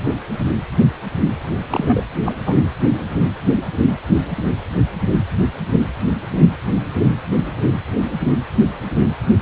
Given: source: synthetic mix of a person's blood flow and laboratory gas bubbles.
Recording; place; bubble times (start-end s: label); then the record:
Doppler ultrasound of blood flow; precordium
1.69-2.03 s: bubbles
2.24-2.34 s: bubbles
2.45-2.60 s: bubbles
From the record:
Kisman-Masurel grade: 212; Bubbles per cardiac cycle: several, 3 to 8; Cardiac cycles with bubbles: 1 to 10%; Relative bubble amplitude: moderate (0.250 to 0.450); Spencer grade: 1 (occasional bubble signal discernible with the cardiac motion signal, with majority of cardiac periods free of bubbles); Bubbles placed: anywhere in the cardiac cycle